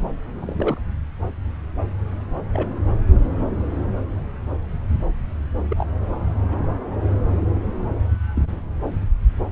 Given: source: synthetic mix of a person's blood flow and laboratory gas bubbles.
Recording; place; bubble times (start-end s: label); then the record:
Doppler ultrasound of blood flow; subclavian vein
0.38-0.81 s: bubbles
2.54-2.74 s: bubbles
5.69-5.86 s: bubbles
6.48-6.71 s: bubbles
7.40-7.46 s: bubbles
8.36-8.49 s: bubbles
From the record:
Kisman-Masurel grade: 121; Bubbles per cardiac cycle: 1 to 2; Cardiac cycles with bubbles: 10 to 50%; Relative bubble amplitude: barely perceptible (0.100 to 0.250); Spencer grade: 2 (many but less than half of the cardiac periods contain bubble signals, singularly or in groups); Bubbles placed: anywhere in the cardiac cycle